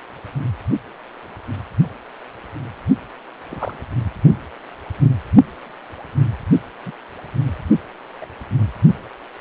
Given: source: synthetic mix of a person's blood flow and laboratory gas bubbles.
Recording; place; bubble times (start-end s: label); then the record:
Doppler ultrasound of blood flow; precordium
3.48-3.78 s: bubbles
6.86-6.92 s: bubbles
8.20-8.25 s: bubbles
From the record:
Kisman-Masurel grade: 121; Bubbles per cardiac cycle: 1 to 2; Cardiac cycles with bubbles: 10 to 50%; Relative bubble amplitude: barely perceptible (0.100 to 0.250); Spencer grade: 2 (many but less than half of the cardiac periods contain bubble signals, singularly or in groups); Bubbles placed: only in the low amplitude regions of the cardiac cycle